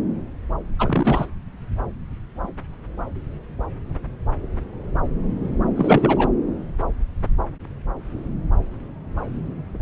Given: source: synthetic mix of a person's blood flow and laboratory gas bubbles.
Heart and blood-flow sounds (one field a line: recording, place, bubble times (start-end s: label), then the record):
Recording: Doppler ultrasound of blood flow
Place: subclavian vein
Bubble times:
0.79-1.26 s: bubbles
5.75-6.29 s: bubbles
From the record:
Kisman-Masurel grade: 223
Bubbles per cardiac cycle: several, 3 to 8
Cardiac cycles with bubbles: 10 to 50%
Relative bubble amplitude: loud (0.450 to 0.775)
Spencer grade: 2 (many but less than half of the cardiac periods contain bubble signals, singularly or in groups)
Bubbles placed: anywhere in the cardiac cycle